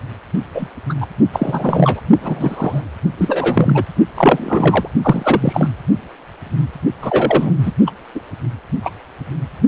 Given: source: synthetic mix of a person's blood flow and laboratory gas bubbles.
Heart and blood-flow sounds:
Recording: Doppler ultrasound of blood flow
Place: precordium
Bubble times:
0.54-0.67 s: bubbles
0.89-0.94 s: bubbles
1.01-1.06 s: bubbles
1.32-2.00 s: bubbles
2.21-2.81 s: bubbles
3.17-3.83 s: bubbles
4.14-4.88 s: bubbles
5.02-5.70 s: bubbles
7.01-7.55 s: bubbles
7.58-7.71 s: bubbles
7.86-7.91 s: bubbles
8.15-8.20 s: bubbles
8.83-8.91 s: bubbles
From the record:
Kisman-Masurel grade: 233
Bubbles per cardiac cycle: several, 3 to 8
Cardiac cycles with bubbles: 50 to 99%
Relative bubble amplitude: loud (0.450 to 0.775)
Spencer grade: 3 (all of the cardiac periods contain showers or single bubble signals, but not dominating or overriding the cardiac motion signals)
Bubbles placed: only in the low amplitude regions of the cardiac cycle

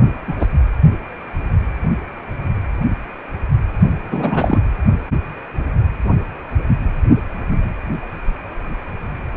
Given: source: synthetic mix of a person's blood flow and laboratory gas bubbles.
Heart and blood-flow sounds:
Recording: Doppler ultrasound of blood flow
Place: precordium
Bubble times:
0.28-0.35 s: bubbles
0.40-0.47 s: bubbles
4.11-4.61 s: bubbles
From the record:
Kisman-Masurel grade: 223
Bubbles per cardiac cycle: several, 3 to 8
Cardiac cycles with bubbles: 10 to 50%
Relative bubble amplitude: loud (0.450 to 0.775)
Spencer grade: 2 (many but less than half of the cardiac periods contain bubble signals, singularly or in groups)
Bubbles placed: only in the low amplitude regions of the cardiac cycle

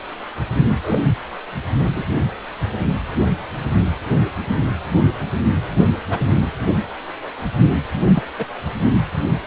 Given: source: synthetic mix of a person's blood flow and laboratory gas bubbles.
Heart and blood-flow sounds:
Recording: Doppler ultrasound of blood flow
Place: precordium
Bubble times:
0.84-1.01 s: bubbles
1.96-2.05 s: bubbles
4.95-5.04 s: bubbles
6.09-6.20 s: bubbles
8.14-8.23 s: bubbles
8.37-8.46 s: bubbles
From the record:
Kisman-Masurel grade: 122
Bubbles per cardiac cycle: 1 to 2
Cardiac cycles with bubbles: 10 to 50%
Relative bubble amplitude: moderate (0.250 to 0.450)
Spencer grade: 2 (many but less than half of the cardiac periods contain bubble signals, singularly or in groups)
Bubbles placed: anywhere in the cardiac cycle

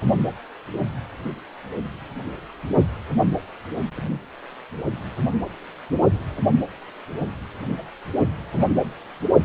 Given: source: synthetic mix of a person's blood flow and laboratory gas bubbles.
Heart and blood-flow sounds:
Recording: Doppler ultrasound of blood flow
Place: precordium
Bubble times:
8.54-8.71 s: bubbles
From the record:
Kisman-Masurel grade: 111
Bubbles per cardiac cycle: 1 to 2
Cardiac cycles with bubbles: 1 to 10%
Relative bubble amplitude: barely perceptible (0.100 to 0.250)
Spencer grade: 1 (occasional bubble signal discernible with the cardiac motion signal, with majority of cardiac periods free of bubbles)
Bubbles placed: only in the low amplitude regions of the cardiac cycle

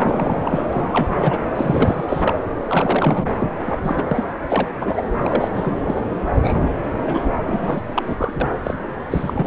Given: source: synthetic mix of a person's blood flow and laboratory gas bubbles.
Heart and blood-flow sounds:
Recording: Doppler ultrasound of blood flow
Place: subclavian vein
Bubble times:
0.00-0.42 s: bubbles
0.45-0.63 s: bubbles
0.72-1.38 s: bubbles
1.54-2.04 s: bubbles
2.08-2.33 s: bubbles
2.67-3.32 s: bubbles
3.37-3.52 s: bubbles
3.65-3.80 s: bubbles
3.84-4.02 s: bubbles
4.08-4.24 s: bubbles
4.48-4.67 s: bubbles
4.80-5.03 s: bubbles
5.22-5.48 s: bubbles
5.54-5.77 s: bubbles
5.79-6.00 s: bubbles
6.42-6.74 s: bubbles
7.02-7.30 s: bubbles
7.46-7.82 s: bubbles
7.94-8.33 s: bubbles
8.40-8.50 s: bubbles
8.63-8.75 s: bubbles
9.11-9.47 s: bubbles
From the record:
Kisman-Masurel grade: 242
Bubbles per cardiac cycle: several, 3 to 8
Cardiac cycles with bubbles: 100%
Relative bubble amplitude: moderate (0.250 to 0.450)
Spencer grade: 3 (all of the cardiac periods contain showers or single bubble signals, but not dominating or overriding the cardiac motion signals)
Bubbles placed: anywhere in the cardiac cycle

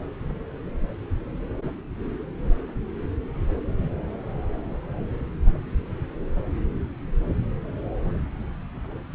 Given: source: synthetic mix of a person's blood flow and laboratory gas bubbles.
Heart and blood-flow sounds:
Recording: Doppler ultrasound of blood flow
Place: subclavian vein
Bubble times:
no bubbles
From the record:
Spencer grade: 0 (complete lack of bubble signals)

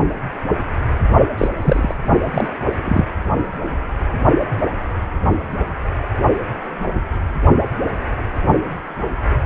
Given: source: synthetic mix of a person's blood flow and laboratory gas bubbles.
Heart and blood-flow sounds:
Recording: Doppler ultrasound of blood flow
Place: precordium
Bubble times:
1.38-1.48 s: bubbles
1.57-1.95 s: bubbles
2.34-2.48 s: bubbles
2.85-3.04 s: bubbles
From the record:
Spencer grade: 2 (many but less than half of the cardiac periods contain bubble signals, singularly or in groups)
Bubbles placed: only in the low amplitude regions of the cardiac cycle

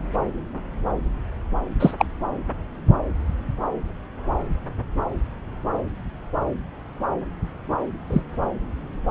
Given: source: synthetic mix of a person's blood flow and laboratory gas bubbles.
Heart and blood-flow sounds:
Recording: Doppler ultrasound of blood flow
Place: subclavian vein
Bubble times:
1.79-1.94 s: bubbles
1.98-2.06 s: bubbles
8.10-8.21 s: bubbles
From the record:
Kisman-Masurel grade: 113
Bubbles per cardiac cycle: 1 to 2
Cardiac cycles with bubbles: 1 to 10%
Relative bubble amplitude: loud (0.450 to 0.775)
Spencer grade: 1 (occasional bubble signal discernible with the cardiac motion signal, with majority of cardiac periods free of bubbles)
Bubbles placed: anywhere in the cardiac cycle

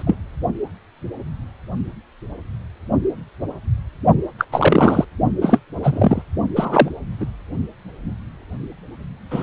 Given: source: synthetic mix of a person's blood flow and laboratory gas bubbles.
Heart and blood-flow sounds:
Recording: Doppler ultrasound of blood flow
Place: precordium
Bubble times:
0.00-0.03 s: bubbles
0.06-0.15 s: bubbles
4.39-4.45 s: bubbles
4.52-5.04 s: bubbles
5.41-5.59 s: bubbles
5.83-6.22 s: bubbles
6.56-6.89 s: bubbles
7.20-7.26 s: bubbles
9.30-9.43 s: bubbles
From the record:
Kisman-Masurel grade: 223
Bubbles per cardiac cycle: several, 3 to 8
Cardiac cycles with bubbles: 10 to 50%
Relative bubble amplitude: loud (0.450 to 0.775)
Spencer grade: 2 (many but less than half of the cardiac periods contain bubble signals, singularly or in groups)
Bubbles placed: only in the low amplitude regions of the cardiac cycle

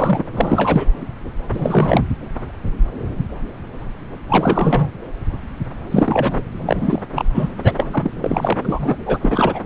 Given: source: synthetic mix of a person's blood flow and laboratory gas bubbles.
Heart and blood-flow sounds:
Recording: Doppler ultrasound of blood flow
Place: subclavian vein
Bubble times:
0.00-0.23 s: bubbles
0.34-0.91 s: bubbles
1.53-2.02 s: bubbles
4.29-4.92 s: bubbles
5.90-6.44 s: bubbles
6.65-7.03 s: bubbles
7.14-7.25 s: bubbles
7.34-7.49 s: bubbles
7.63-7.73 s: bubbles
7.77-8.12 s: bubbles
8.14-8.58 s: bubbles
8.65-8.96 s: bubbles
9.06-9.19 s: bubbles
9.21-9.61 s: bubbles
From the record:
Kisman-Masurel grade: 333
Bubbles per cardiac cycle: rolling drumbeat, 9 or more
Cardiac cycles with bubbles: 50 to 99%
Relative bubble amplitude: loud (0.450 to 0.775)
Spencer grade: 3 (all of the cardiac periods contain showers or single bubble signals, but not dominating or overriding the cardiac motion signals)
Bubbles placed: anywhere in the cardiac cycle

